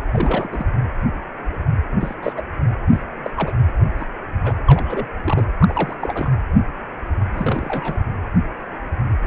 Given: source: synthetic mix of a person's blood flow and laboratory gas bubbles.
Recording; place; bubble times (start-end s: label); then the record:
Doppler ultrasound of blood flow; precordium
0.12-0.49 s: bubbles
0.52-0.66 s: bubbles
2.00-2.15 s: bubbles
2.22-2.33 s: bubbles
2.36-2.41 s: bubbles
2.90-3.05 s: bubbles
3.23-3.30 s: bubbles
3.36-3.52 s: bubbles
3.97-4.06 s: bubbles
4.43-4.55 s: bubbles
4.66-5.06 s: bubbles
5.24-5.44 s: bubbles
5.59-5.96 s: bubbles
6.01-6.32 s: bubbles
7.31-7.99 s: bubbles
From the record:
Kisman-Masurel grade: 232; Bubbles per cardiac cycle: several, 3 to 8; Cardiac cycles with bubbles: 50 to 99%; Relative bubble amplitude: moderate (0.250 to 0.450); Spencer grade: 3 (all of the cardiac periods contain showers or single bubble signals, but not dominating or overriding the cardiac motion signals); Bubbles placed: anywhere in the cardiac cycle